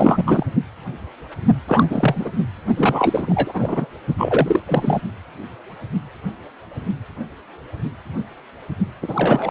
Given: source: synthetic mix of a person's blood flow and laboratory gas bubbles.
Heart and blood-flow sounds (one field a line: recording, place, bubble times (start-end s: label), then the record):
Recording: Doppler ultrasound of blood flow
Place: precordium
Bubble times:
0.00-0.46 s: bubbles
1.68-2.29 s: bubbles
2.76-3.86 s: bubbles
4.17-4.61 s: bubbles
4.67-5.00 s: bubbles
9.02-9.51 s: bubbles
From the record:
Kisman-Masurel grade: 333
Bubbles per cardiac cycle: rolling drumbeat, 9 or more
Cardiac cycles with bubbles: 50 to 99%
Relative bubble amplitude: loud (0.450 to 0.775)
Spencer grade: 3 (all of the cardiac periods contain showers or single bubble signals, but not dominating or overriding the cardiac motion signals)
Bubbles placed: only in the low amplitude regions of the cardiac cycle